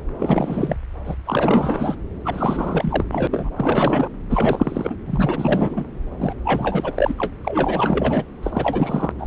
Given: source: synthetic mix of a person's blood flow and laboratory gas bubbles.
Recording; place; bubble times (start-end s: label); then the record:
Doppler ultrasound of blood flow; subclavian vein
0.18-0.77 s: bubbles
1.06-1.15 s: bubbles
1.25-1.96 s: bubbles
2.24-3.06 s: bubbles
3.12-3.27 s: bubbles
3.30-3.50 s: bubbles
3.56-4.09 s: bubbles
4.29-4.95 s: bubbles
5.06-5.85 s: bubbles
6.17-6.33 s: bubbles
6.44-6.92 s: bubbles
6.94-7.33 s: bubbles
7.43-8.24 s: bubbles
8.42-9.11 s: bubbles
9.19-9.27 s: bubbles
From the record:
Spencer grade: 4 (maximum detectable bubble signal sounding continuously throughout systole and diastole of every cardiac period, and overriding the amplitude of the normal cardiac signals); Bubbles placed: anywhere in the cardiac cycle